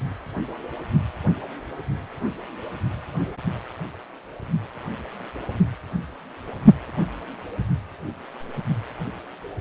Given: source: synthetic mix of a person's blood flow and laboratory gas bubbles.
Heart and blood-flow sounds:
Doppler ultrasound of blood flow; precordium
no bubbles
From the record:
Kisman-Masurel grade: 000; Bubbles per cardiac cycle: 0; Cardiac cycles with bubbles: 0%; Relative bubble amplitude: no bubbles discernible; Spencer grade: 0 (complete lack of bubble signals)

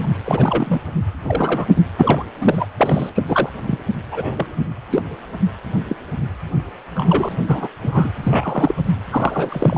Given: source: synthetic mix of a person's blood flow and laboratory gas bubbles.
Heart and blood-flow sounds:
Doppler ultrasound of blood flow; precordium
0.00-0.08 s: bubbles
0.26-0.81 s: bubbles
1.25-1.71 s: bubbles
1.75-1.81 s: bubbles
1.98-2.25 s: bubbles
2.40-2.65 s: bubbles
2.78-3.11 s: bubbles
3.15-3.23 s: bubbles
3.28-3.50 s: bubbles
3.66-3.78 s: bubbles
4.12-4.46 s: bubbles
4.91-5.02 s: bubbles
5.88-5.96 s: bubbles
6.96-7.29 s: bubbles
7.46-7.68 s: bubbles
7.82-8.11 s: bubbles
8.23-8.75 s: bubbles
9.11-9.78 s: bubbles
From the record:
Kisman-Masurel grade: 243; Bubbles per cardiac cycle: several, 3 to 8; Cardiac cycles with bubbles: 100%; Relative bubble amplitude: loud (0.450 to 0.775); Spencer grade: 3 (all of the cardiac periods contain showers or single bubble signals, but not dominating or overriding the cardiac motion signals); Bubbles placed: anywhere in the cardiac cycle

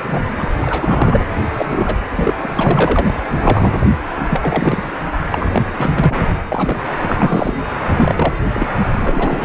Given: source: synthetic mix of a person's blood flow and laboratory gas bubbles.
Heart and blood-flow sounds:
Doppler ultrasound of blood flow; precordium
0.08-0.24 s: bubbles
0.37-0.48 s: bubbles
0.61-1.26 s: bubbles
1.51-1.99 s: bubbles
2.17-2.33 s: bubbles
2.42-2.46 s: bubbles
2.55-3.16 s: bubbles
3.37-3.86 s: bubbles
4.29-4.93 s: bubbles
5.32-5.64 s: bubbles
5.78-6.32 s: bubbles
6.49-6.82 s: bubbles
7.02-7.56 s: bubbles
7.86-8.41 s: bubbles
8.53-8.67 s: bubbles
8.93-9.45 s: bubbles
From the record:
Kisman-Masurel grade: 343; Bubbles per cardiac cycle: rolling drumbeat, 9 or more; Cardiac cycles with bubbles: 100%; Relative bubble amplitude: loud (0.450 to 0.775); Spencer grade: 3 (all of the cardiac periods contain showers or single bubble signals, but not dominating or overriding the cardiac motion signals); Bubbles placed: anywhere in the cardiac cycle

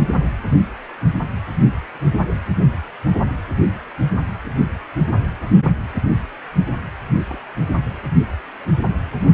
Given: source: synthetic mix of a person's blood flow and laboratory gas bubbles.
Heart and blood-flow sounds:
Doppler ultrasound of blood flow; precordium
0.88-0.92 s: bubbles
7.28-7.41 s: bubbles
From the record:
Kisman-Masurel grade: 111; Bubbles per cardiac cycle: 1 to 2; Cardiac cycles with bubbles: 1 to 10%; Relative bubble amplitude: barely perceptible (0.100 to 0.250); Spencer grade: 1 (occasional bubble signal discernible with the cardiac motion signal, with majority of cardiac periods free of bubbles); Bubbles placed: anywhere in the cardiac cycle

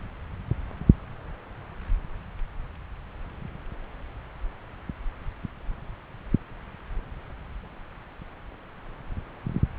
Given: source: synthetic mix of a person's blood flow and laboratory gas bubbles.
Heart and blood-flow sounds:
Doppler ultrasound of blood flow; subclavian vein
no bubbles
From the record:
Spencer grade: 0 (complete lack of bubble signals)

